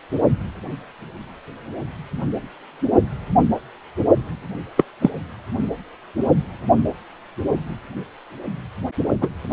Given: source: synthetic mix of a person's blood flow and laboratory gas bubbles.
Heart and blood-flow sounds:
Doppler ultrasound of blood flow; precordium
4.77-4.84 s: bubbles
5.01-5.10 s: bubbles
9.21-9.29 s: bubbles
From the record:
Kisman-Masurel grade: 123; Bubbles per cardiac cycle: 1 to 2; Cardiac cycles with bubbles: 10 to 50%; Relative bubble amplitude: loud (0.450 to 0.775); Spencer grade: 2 (many but less than half of the cardiac periods contain bubble signals, singularly or in groups); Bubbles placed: only in the low amplitude regions of the cardiac cycle

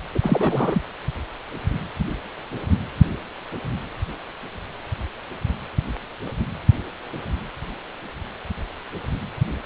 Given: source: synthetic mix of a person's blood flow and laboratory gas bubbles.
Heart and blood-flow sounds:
Doppler ultrasound of blood flow; precordium
0.14-0.19 s: bubbles
0.23-0.81 s: bubbles
From the record:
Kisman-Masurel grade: 212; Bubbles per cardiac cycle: several, 3 to 8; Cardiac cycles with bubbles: 1 to 10%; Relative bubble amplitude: moderate (0.250 to 0.450); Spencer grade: 1 (occasional bubble signal discernible with the cardiac motion signal, with majority of cardiac periods free of bubbles); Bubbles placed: anywhere in the cardiac cycle

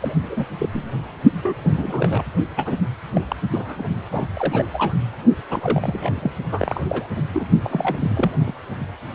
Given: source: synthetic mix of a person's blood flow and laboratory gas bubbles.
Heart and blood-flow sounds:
Doppler ultrasound of blood flow; precordium
0.00-0.14 s: bubbles
0.20-0.45 s: bubbles
0.58-0.69 s: bubbles
0.73-0.84 s: bubbles
1.43-1.56 s: bubbles
1.63-2.23 s: bubbles
2.56-2.90 s: bubbles
3.13-3.21 s: bubbles
3.28-3.36 s: bubbles
3.50-3.83 s: bubbles
4.12-4.26 s: bubbles
4.37-4.66 s: bubbles
4.73-4.95 s: bubbles
5.50-6.33 s: bubbles
6.51-6.81 s: bubbles
6.88-7.06 s: bubbles
7.16-7.26 s: bubbles
7.33-7.45 s: bubbles
7.63-8.31 s: bubbles
8.46-8.52 s: bubbles
From the record:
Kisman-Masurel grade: 242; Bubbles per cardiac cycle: several, 3 to 8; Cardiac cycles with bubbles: 100%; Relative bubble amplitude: moderate (0.250 to 0.450); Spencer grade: 3 (all of the cardiac periods contain showers or single bubble signals, but not dominating or overriding the cardiac motion signals); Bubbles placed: only in the low amplitude regions of the cardiac cycle

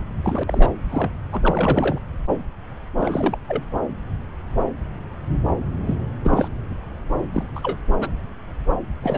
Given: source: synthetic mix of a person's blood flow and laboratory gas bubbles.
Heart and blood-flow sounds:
Doppler ultrasound of blood flow; subclavian vein
0.23-0.43 s: bubbles
0.47-0.70 s: bubbles
0.90-1.10 s: bubbles
1.32-1.99 s: bubbles
2.98-3.37 s: bubbles
3.49-3.63 s: bubbles
5.87-5.95 s: bubbles
6.23-6.49 s: bubbles
7.33-7.43 s: bubbles
7.55-7.78 s: bubbles
8.00-8.11 s: bubbles
9.02-9.18 s: bubbles
From the record:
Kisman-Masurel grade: 232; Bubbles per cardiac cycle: several, 3 to 8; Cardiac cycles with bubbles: 50 to 99%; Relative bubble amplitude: moderate (0.250 to 0.450); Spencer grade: 3 (all of the cardiac periods contain showers or single bubble signals, but not dominating or overriding the cardiac motion signals); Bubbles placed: anywhere in the cardiac cycle

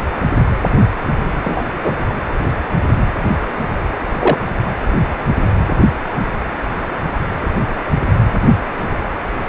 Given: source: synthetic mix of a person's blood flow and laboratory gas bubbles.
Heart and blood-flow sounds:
Doppler ultrasound of blood flow; precordium
1.44-1.62 s: bubbles
1.82-1.95 s: bubbles
4.19-4.38 s: bubbles
From the record:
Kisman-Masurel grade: 123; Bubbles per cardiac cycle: 1 to 2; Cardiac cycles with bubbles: 10 to 50%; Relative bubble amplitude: loud (0.450 to 0.775); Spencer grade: 2 (many but less than half of the cardiac periods contain bubble signals, singularly or in groups); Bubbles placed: anywhere in the cardiac cycle

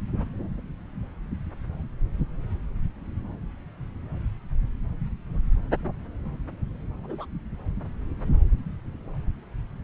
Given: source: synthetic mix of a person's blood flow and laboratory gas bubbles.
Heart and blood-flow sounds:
Doppler ultrasound of blood flow; subclavian vein
7.03-7.25 s: bubbles
From the record:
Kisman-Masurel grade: 111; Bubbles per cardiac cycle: 1 to 2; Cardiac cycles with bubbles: 1 to 10%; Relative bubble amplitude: barely perceptible (0.100 to 0.250); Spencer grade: 1 (occasional bubble signal discernible with the cardiac motion signal, with majority of cardiac periods free of bubbles); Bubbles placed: anywhere in the cardiac cycle

